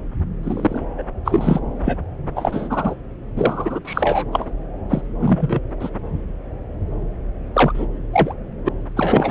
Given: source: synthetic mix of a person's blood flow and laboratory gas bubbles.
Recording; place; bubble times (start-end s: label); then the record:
Doppler ultrasound of blood flow; subclavian vein
0.43-0.81 s: bubbles
0.98-1.03 s: bubbles
1.25-1.60 s: bubbles
1.78-2.01 s: bubbles
2.36-2.96 s: bubbles
3.36-3.79 s: bubbles
3.85-4.25 s: bubbles
4.32-4.50 s: bubbles
4.90-5.02 s: bubbles
5.20-5.60 s: bubbles
5.79-5.90 s: bubbles
7.54-7.86 s: bubbles
8.13-8.35 s: bubbles
8.65-8.69 s: bubbles
8.96-9.31 s: bubbles
From the record:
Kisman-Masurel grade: 233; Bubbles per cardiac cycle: several, 3 to 8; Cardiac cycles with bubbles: 50 to 99%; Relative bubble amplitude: loud (0.450 to 0.775); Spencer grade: 3 (all of the cardiac periods contain showers or single bubble signals, but not dominating or overriding the cardiac motion signals); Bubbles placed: anywhere in the cardiac cycle